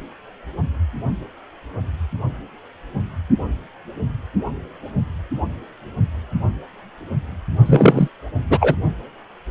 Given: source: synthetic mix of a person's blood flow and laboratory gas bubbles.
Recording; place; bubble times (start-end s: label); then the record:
Doppler ultrasound of blood flow; precordium
7.66-8.08 s: bubbles
8.50-8.74 s: bubbles
From the record:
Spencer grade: 1 (occasional bubble signal discernible with the cardiac motion signal, with majority of cardiac periods free of bubbles); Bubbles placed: only in the low amplitude regions of the cardiac cycle